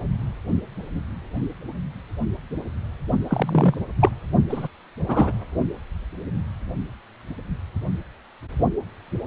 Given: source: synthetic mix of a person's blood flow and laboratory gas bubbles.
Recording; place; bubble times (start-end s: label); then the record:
Doppler ultrasound of blood flow; precordium
3.29-3.74 s: bubbles
4.01-4.11 s: bubbles
4.48-4.68 s: bubbles
5.08-5.32 s: bubbles
From the record:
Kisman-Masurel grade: 222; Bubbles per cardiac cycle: several, 3 to 8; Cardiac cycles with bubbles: 10 to 50%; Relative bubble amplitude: moderate (0.250 to 0.450); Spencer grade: 2 (many but less than half of the cardiac periods contain bubble signals, singularly or in groups); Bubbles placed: only in the low amplitude regions of the cardiac cycle